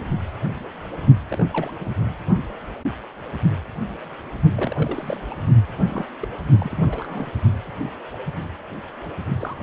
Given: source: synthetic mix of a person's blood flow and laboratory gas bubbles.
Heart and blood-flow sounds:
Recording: Doppler ultrasound of blood flow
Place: precordium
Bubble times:
1.28-1.46 s: bubbles
1.50-1.72 s: bubbles
1.76-1.89 s: bubbles
4.56-5.21 s: bubbles
5.30-5.35 s: bubbles
5.86-6.05 s: bubbles
6.20-6.28 s: bubbles
6.60-7.32 s: bubbles
9.39-9.57 s: bubbles
From the record:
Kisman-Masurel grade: 221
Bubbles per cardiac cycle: several, 3 to 8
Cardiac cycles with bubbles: 10 to 50%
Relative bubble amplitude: barely perceptible (0.100 to 0.250)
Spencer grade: 2 (many but less than half of the cardiac periods contain bubble signals, singularly or in groups)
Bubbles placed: only in the low amplitude regions of the cardiac cycle

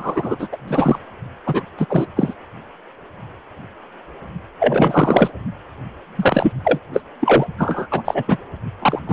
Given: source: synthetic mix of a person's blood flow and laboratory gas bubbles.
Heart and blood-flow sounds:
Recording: Doppler ultrasound of blood flow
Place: precordium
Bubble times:
0.00-0.36 s: bubbles
0.39-0.48 s: bubbles
0.52-0.57 s: bubbles
0.67-0.99 s: bubbles
1.46-1.63 s: bubbles
1.77-1.86 s: bubbles
1.89-2.08 s: bubbles
2.16-2.33 s: bubbles
4.59-5.30 s: bubbles
6.16-6.52 s: bubbles
6.64-6.79 s: bubbles
6.92-7.01 s: bubbles
7.20-7.46 s: bubbles
7.58-7.87 s: bubbles
7.90-8.02 s: bubbles
8.04-8.23 s: bubbles
8.28-8.37 s: bubbles
8.81-8.99 s: bubbles
9.06-9.13 s: bubbles
From the record:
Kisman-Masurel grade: 233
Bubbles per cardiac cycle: several, 3 to 8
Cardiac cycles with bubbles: 50 to 99%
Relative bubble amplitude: loud (0.450 to 0.775)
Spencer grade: 3 (all of the cardiac periods contain showers or single bubble signals, but not dominating or overriding the cardiac motion signals)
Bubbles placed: only in the low amplitude regions of the cardiac cycle

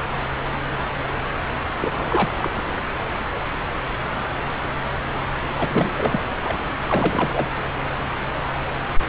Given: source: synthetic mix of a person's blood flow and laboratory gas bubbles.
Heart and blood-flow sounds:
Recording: Doppler ultrasound of blood flow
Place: subclavian vein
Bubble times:
1.78-2.33 s: bubbles
2.38-2.62 s: bubbles
5.54-5.90 s: bubbles
5.96-6.19 s: bubbles
6.43-6.58 s: bubbles
6.88-7.47 s: bubbles
From the record:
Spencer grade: 2 (many but less than half of the cardiac periods contain bubble signals, singularly or in groups)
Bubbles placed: anywhere in the cardiac cycle

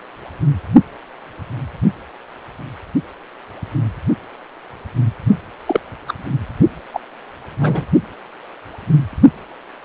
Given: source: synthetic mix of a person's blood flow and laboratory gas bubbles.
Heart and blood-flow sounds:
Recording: Doppler ultrasound of blood flow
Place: precordium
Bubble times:
5.66-5.80 s: bubbles
6.08-6.14 s: bubbles
6.93-7.00 s: bubbles
7.61-7.84 s: bubbles
From the record:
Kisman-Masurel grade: 123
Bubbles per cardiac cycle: 1 to 2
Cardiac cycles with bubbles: 10 to 50%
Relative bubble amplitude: loud (0.450 to 0.775)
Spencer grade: 2 (many but less than half of the cardiac periods contain bubble signals, singularly or in groups)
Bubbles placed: only in the low amplitude regions of the cardiac cycle

